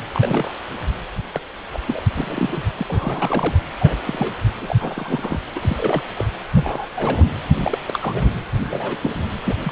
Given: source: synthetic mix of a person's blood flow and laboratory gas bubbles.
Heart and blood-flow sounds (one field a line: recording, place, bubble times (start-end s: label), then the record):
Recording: Doppler ultrasound of blood flow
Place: precordium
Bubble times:
0.12-0.54 s: bubbles
1.32-1.41 s: bubbles
1.73-1.80 s: bubbles
1.85-2.02 s: bubbles
2.14-2.64 s: bubbles
2.77-3.58 s: bubbles
3.79-3.97 s: bubbles
4.05-4.33 s: bubbles
4.61-4.76 s: bubbles
4.78-5.40 s: bubbles
5.55-6.03 s: bubbles
6.17-6.24 s: bubbles
6.53-6.86 s: bubbles
6.95-7.25 s: bubbles
7.64-7.78 s: bubbles
7.87-8.35 s: bubbles
8.70-8.97 s: bubbles
9.03-9.16 s: bubbles
9.44-9.72 s: bubbles
From the record:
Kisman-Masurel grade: 242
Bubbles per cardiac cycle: several, 3 to 8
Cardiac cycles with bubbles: 100%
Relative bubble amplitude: moderate (0.250 to 0.450)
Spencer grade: 3 (all of the cardiac periods contain showers or single bubble signals, but not dominating or overriding the cardiac motion signals)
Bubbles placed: anywhere in the cardiac cycle